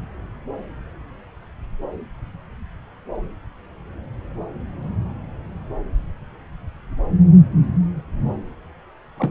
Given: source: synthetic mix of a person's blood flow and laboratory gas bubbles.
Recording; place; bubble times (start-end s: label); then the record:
Doppler ultrasound of blood flow; subclavian vein
9.17-9.31 s: bubbles
From the record:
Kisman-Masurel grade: 112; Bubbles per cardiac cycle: 1 to 2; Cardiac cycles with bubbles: 1 to 10%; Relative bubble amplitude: moderate (0.250 to 0.450); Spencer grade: 1 (occasional bubble signal discernible with the cardiac motion signal, with majority of cardiac periods free of bubbles); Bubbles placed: anywhere in the cardiac cycle